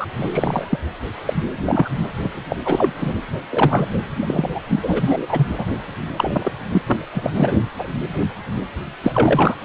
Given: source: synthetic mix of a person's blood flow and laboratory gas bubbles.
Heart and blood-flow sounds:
Doppler ultrasound of blood flow; precordium
0.00-0.08 s: bubbles
0.16-0.79 s: bubbles
1.25-1.33 s: bubbles
1.66-1.90 s: bubbles
2.23-2.29 s: bubbles
2.48-2.56 s: bubbles
2.64-2.92 s: bubbles
2.98-3.14 s: bubbles
3.50-3.87 s: bubbles
4.14-4.60 s: bubbles
4.69-5.47 s: bubbles
5.58-5.65 s: bubbles
6.16-6.52 s: bubbles
6.71-6.82 s: bubbles
6.86-7.06 s: bubbles
7.13-7.30 s: bubbles
7.35-7.56 s: bubbles
7.78-7.87 s: bubbles
9.03-9.55 s: bubbles
From the record:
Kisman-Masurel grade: 333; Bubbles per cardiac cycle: rolling drumbeat, 9 or more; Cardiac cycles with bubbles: 50 to 99%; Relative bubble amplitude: loud (0.450 to 0.775); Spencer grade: 3 (all of the cardiac periods contain showers or single bubble signals, but not dominating or overriding the cardiac motion signals); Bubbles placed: anywhere in the cardiac cycle

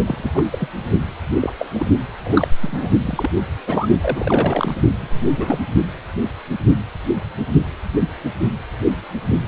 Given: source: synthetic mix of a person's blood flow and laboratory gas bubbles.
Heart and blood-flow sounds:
Doppler ultrasound of blood flow; precordium
0.05-0.30 s: bubbles
0.34-0.68 s: bubbles
1.41-1.53 s: bubbles
1.58-1.67 s: bubbles
1.74-1.89 s: bubbles
2.23-2.54 s: bubbles
2.61-2.90 s: bubbles
3.05-3.30 s: bubbles
3.67-3.89 s: bubbles
4.01-4.75 s: bubbles
5.00-5.58 s: bubbles
From the record:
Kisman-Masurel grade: 232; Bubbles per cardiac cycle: several, 3 to 8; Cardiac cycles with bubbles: 50 to 99%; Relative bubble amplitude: moderate (0.250 to 0.450); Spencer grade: 3 (all of the cardiac periods contain showers or single bubble signals, but not dominating or overriding the cardiac motion signals); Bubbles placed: only in the low amplitude regions of the cardiac cycle

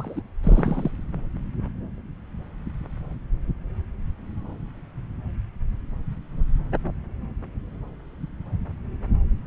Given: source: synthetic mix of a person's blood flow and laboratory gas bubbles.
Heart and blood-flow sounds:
Doppler ultrasound of blood flow; subclavian vein
0.00-0.21 s: bubbles
0.43-0.91 s: bubbles
From the record:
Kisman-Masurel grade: 211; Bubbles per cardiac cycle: several, 3 to 8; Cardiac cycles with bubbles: 1 to 10%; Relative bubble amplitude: barely perceptible (0.100 to 0.250); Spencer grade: 1 (occasional bubble signal discernible with the cardiac motion signal, with majority of cardiac periods free of bubbles); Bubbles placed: anywhere in the cardiac cycle

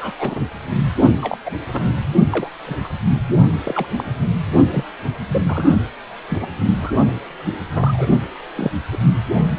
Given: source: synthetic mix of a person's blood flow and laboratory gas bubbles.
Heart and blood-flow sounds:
Doppler ultrasound of blood flow; precordium
0.00-0.12 s: bubbles
0.19-0.43 s: bubbles
1.21-1.38 s: bubbles
1.45-1.51 s: bubbles
1.71-1.93 s: bubbles
2.30-2.50 s: bubbles
2.66-2.76 s: bubbles
2.83-2.88 s: bubbles
3.65-3.86 s: bubbles
3.96-4.04 s: bubbles
4.71-4.84 s: bubbles
5.27-5.42 s: bubbles
5.47-5.83 s: bubbles
6.29-6.49 s: bubbles
6.80-6.93 s: bubbles
7.75-8.06 s: bubbles
8.56-8.71 s: bubbles
8.91-8.98 s: bubbles
9.57-9.59 s: bubbles
From the record:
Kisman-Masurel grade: 242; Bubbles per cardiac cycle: several, 3 to 8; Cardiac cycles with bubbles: 100%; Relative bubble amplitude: moderate (0.250 to 0.450); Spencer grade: 3 (all of the cardiac periods contain showers or single bubble signals, but not dominating or overriding the cardiac motion signals); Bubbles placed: only in the low amplitude regions of the cardiac cycle

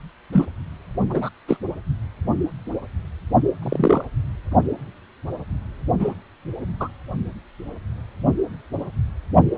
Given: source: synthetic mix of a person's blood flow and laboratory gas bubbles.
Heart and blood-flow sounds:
Doppler ultrasound of blood flow; precordium
0.32-0.47 s: bubbles
1.09-1.29 s: bubbles
1.47-1.57 s: bubbles
3.61-4.04 s: bubbles
6.00-6.13 s: bubbles
6.79-6.88 s: bubbles
From the record:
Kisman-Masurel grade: 123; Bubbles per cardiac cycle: 1 to 2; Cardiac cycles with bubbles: 10 to 50%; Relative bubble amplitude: loud (0.450 to 0.775); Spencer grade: 2 (many but less than half of the cardiac periods contain bubble signals, singularly or in groups); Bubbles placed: only in the low amplitude regions of the cardiac cycle

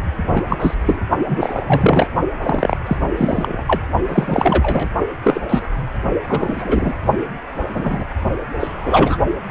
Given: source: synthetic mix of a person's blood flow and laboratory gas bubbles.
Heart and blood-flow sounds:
Doppler ultrasound of blood flow; precordium
0.32-0.74 s: bubbles
0.86-1.01 s: bubbles
1.28-2.08 s: bubbles
2.42-2.77 s: bubbles
2.86-2.97 s: bubbles
3.17-3.82 s: bubbles
4.08-4.89 s: bubbles
5.23-5.69 s: bubbles
6.27-6.94 s: bubbles
7.18-7.24 s: bubbles
7.74-8.04 s: bubbles
8.60-9.17 s: bubbles
From the record:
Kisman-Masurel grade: 243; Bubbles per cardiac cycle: several, 3 to 8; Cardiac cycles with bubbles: 100%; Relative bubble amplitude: loud (0.450 to 0.775); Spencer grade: 3 (all of the cardiac periods contain showers or single bubble signals, but not dominating or overriding the cardiac motion signals); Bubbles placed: only in the low amplitude regions of the cardiac cycle

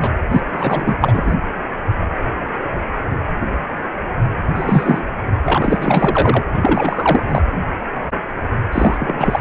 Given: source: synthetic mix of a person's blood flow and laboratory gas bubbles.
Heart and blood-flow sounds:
Doppler ultrasound of blood flow; precordium
0.00-0.11 s: bubbles
0.31-0.41 s: bubbles
0.52-0.95 s: bubbles
1.01-1.35 s: bubbles
4.47-5.06 s: bubbles
5.45-6.43 s: bubbles
6.53-7.23 s: bubbles
7.29-7.42 s: bubbles
8.72-9.39 s: bubbles
From the record:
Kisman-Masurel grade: 333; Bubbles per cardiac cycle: rolling drumbeat, 9 or more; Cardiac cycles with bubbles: 50 to 99%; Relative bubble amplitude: loud (0.450 to 0.775); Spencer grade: 3 (all of the cardiac periods contain showers or single bubble signals, but not dominating or overriding the cardiac motion signals); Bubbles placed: anywhere in the cardiac cycle

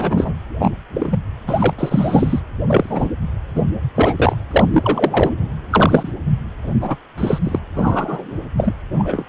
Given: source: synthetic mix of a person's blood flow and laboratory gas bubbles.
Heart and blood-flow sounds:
Doppler ultrasound of blood flow; precordium
0.00-0.34 s: bubbles
0.59-0.70 s: bubbles
0.94-1.18 s: bubbles
1.47-1.74 s: bubbles
1.78-2.40 s: bubbles
2.67-3.09 s: bubbles
3.55-3.62 s: bubbles
3.95-4.15 s: bubbles
4.17-4.34 s: bubbles
4.51-5.31 s: bubbles
5.70-6.11 s: bubbles
6.66-6.96 s: bubbles
7.17-7.38 s: bubbles
7.44-7.59 s: bubbles
7.75-8.38 s: bubbles
8.57-8.74 s: bubbles
8.98-9.25 s: bubbles
From the record:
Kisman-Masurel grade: 243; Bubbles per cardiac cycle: several, 3 to 8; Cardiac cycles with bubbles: 100%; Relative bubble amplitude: loud (0.450 to 0.775); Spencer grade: 3 (all of the cardiac periods contain showers or single bubble signals, but not dominating or overriding the cardiac motion signals); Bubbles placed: anywhere in the cardiac cycle

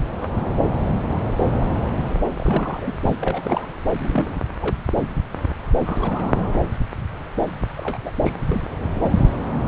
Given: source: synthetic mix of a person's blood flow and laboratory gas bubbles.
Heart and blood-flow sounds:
Doppler ultrasound of blood flow; subclavian vein
2.36-2.96 s: bubbles
3.05-3.17 s: bubbles
3.21-3.72 s: bubbles
3.99-4.33 s: bubbles
4.56-4.76 s: bubbles
5.79-6.32 s: bubbles
6.38-6.42 s: bubbles
6.46-6.59 s: bubbles
7.79-7.98 s: bubbles
8.03-8.11 s: bubbles
8.22-8.33 s: bubbles
8.48-8.68 s: bubbles
8.93-9.11 s: bubbles
From the record:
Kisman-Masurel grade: 221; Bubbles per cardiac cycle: several, 3 to 8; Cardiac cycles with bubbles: 10 to 50%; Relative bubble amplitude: barely perceptible (0.100 to 0.250); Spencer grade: 2 (many but less than half of the cardiac periods contain bubble signals, singularly or in groups); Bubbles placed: anywhere in the cardiac cycle

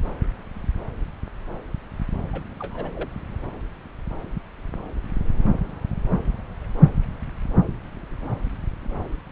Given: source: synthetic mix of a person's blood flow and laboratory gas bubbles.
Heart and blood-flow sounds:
Doppler ultrasound of blood flow; subclavian vein
2.33-2.44 s: bubbles
2.58-2.91 s: bubbles
2.94-3.09 s: bubbles
From the record:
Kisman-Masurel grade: 221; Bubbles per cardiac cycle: several, 3 to 8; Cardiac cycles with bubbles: 10 to 50%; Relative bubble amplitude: barely perceptible (0.100 to 0.250); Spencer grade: 2 (many but less than half of the cardiac periods contain bubble signals, singularly or in groups); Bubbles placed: anywhere in the cardiac cycle

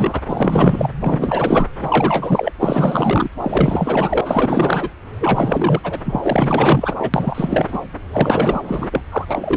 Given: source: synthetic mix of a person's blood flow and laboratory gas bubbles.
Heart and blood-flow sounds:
Doppler ultrasound of blood flow; subclavian vein
0.00-0.21 s: bubbles
0.28-0.92 s: bubbles
0.99-1.67 s: bubbles
1.79-2.52 s: bubbles
2.60-3.31 s: bubbles
3.42-4.21 s: bubbles
4.25-4.89 s: bubbles
5.20-5.80 s: bubbles
5.83-5.99 s: bubbles
6.05-6.96 s: bubbles
6.99-7.09 s: bubbles
7.13-7.79 s: bubbles
8.10-8.89 s: bubbles
8.92-9.04 s: bubbles
9.12-9.25 s: bubbles
9.31-9.57 s: bubbles
From the record:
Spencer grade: 4 (maximum detectable bubble signal sounding continuously throughout systole and diastole of every cardiac period, and overriding the amplitude of the normal cardiac signals); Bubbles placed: anywhere in the cardiac cycle

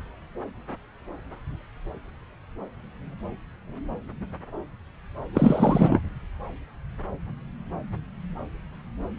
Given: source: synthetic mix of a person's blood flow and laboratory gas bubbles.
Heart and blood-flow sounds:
Doppler ultrasound of blood flow; subclavian vein
5.35-6.00 s: bubbles
From the record:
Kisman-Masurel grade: 212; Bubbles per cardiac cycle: several, 3 to 8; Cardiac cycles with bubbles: 1 to 10%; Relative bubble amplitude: moderate (0.250 to 0.450); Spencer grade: 1 (occasional bubble signal discernible with the cardiac motion signal, with majority of cardiac periods free of bubbles); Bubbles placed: anywhere in the cardiac cycle

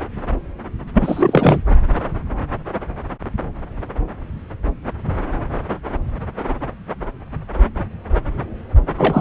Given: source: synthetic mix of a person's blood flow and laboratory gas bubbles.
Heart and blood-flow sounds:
Doppler ultrasound of blood flow; subclavian vein
0.94-1.58 s: bubbles
8.97-9.21 s: bubbles
From the record:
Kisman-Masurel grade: 223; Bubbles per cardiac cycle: several, 3 to 8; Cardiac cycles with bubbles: 10 to 50%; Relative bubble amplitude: loud (0.450 to 0.775); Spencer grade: 2 (many but less than half of the cardiac periods contain bubble signals, singularly or in groups); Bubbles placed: anywhere in the cardiac cycle

